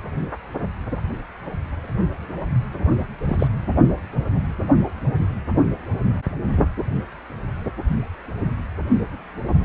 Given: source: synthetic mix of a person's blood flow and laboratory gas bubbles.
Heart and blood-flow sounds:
Doppler ultrasound of blood flow; precordium
3.27-3.48 s: bubbles
From the record:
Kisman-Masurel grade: 112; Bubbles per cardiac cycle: 1 to 2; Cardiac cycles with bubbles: 1 to 10%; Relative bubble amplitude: moderate (0.250 to 0.450); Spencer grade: 1 (occasional bubble signal discernible with the cardiac motion signal, with majority of cardiac periods free of bubbles); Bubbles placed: anywhere in the cardiac cycle

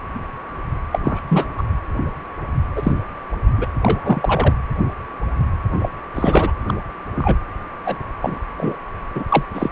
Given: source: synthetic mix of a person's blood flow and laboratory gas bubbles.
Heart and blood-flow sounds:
Doppler ultrasound of blood flow; precordium
0.92-0.99 s: bubbles
1.04-1.22 s: bubbles
1.29-1.46 s: bubbles
1.57-1.63 s: bubbles
2.75-2.93 s: bubbles
3.57-3.67 s: bubbles
3.82-4.55 s: bubbles
5.79-5.89 s: bubbles
6.15-6.52 s: bubbles
6.67-6.75 s: bubbles
7.15-7.37 s: bubbles
7.85-7.97 s: bubbles
8.21-8.39 s: bubbles
8.56-8.76 s: bubbles
9.14-9.24 s: bubbles
9.29-9.43 s: bubbles
9.54-9.69 s: bubbles
From the record:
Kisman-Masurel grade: 233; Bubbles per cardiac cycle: several, 3 to 8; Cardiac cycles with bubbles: 50 to 99%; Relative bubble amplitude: loud (0.450 to 0.775); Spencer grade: 3 (all of the cardiac periods contain showers or single bubble signals, but not dominating or overriding the cardiac motion signals); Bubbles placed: anywhere in the cardiac cycle

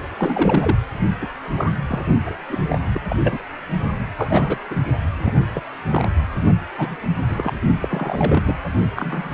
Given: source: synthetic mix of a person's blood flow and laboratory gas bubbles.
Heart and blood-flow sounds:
Doppler ultrasound of blood flow; precordium
0.18-0.77 s: bubbles
1.22-1.29 s: bubbles
1.57-1.72 s: bubbles
1.88-2.03 s: bubbles
2.25-2.45 s: bubbles
2.48-2.88 s: bubbles
2.94-3.00 s: bubbles
3.09-3.16 s: bubbles
3.22-3.43 s: bubbles
4.17-4.58 s: bubbles
4.70-4.75 s: bubbles
5.17-5.33 s: bubbles
5.54-5.65 s: bubbles
5.91-6.07 s: bubbles
6.78-6.96 s: bubbles
7.27-7.58 s: bubbles
7.81-8.56 s: bubbles
8.96-9.30 s: bubbles
From the record:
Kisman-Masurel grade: 242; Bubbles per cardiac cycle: several, 3 to 8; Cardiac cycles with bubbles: 100%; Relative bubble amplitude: moderate (0.250 to 0.450); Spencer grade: 3 (all of the cardiac periods contain showers or single bubble signals, but not dominating or overriding the cardiac motion signals); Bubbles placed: only in the low amplitude regions of the cardiac cycle

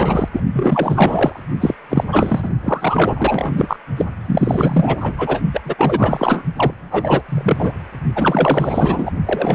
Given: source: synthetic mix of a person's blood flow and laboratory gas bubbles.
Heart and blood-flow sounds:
Doppler ultrasound of blood flow; precordium
0.00-0.29 s: bubbles
0.32-0.41 s: bubbles
0.53-1.40 s: bubbles
1.60-1.75 s: bubbles
1.89-2.04 s: bubbles
2.12-2.50 s: bubbles
2.63-3.77 s: bubbles
3.97-4.05 s: bubbles
4.19-5.14 s: bubbles
5.17-5.40 s: bubbles
5.53-5.61 s: bubbles
5.64-5.74 s: bubbles
5.78-6.43 s: bubbles
6.57-6.74 s: bubbles
6.77-7.22 s: bubbles
7.28-7.72 s: bubbles
8.15-9.12 s: bubbles
9.26-9.55 s: bubbles
From the record:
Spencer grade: 4 (maximum detectable bubble signal sounding continuously throughout systole and diastole of every cardiac period, and overriding the amplitude of the normal cardiac signals); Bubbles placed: only in the low amplitude regions of the cardiac cycle

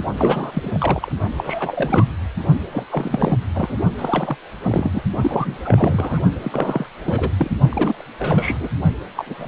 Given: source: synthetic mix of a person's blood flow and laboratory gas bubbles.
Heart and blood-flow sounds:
Doppler ultrasound of blood flow; precordium
0.17-1.12 s: bubbles
1.37-2.06 s: bubbles
2.72-2.85 s: bubbles
2.90-3.37 s: bubbles
3.55-3.78 s: bubbles
3.98-4.37 s: bubbles
4.63-5.02 s: bubbles
5.21-5.59 s: bubbles
5.64-6.21 s: bubbles
6.43-6.86 s: bubbles
7.04-7.31 s: bubbles
7.37-7.50 s: bubbles
7.71-8.04 s: bubbles
8.18-8.68 s: bubbles
9.16-9.34 s: bubbles
9.38-9.48 s: bubbles
From the record:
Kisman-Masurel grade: 342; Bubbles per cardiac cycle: rolling drumbeat, 9 or more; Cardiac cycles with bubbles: 100%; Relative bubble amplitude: moderate (0.250 to 0.450); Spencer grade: 3 (all of the cardiac periods contain showers or single bubble signals, but not dominating or overriding the cardiac motion signals); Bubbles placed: only in the low amplitude regions of the cardiac cycle

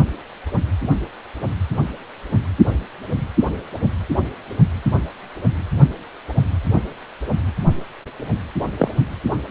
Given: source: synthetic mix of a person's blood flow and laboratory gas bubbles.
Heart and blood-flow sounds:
Doppler ultrasound of blood flow; precordium
8.79-8.89 s: bubbles
From the record:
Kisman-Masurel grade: 113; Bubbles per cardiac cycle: 1 to 2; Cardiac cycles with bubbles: 1 to 10%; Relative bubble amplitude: loud (0.450 to 0.775); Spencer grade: 1 (occasional bubble signal discernible with the cardiac motion signal, with majority of cardiac periods free of bubbles); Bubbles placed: only in the low amplitude regions of the cardiac cycle

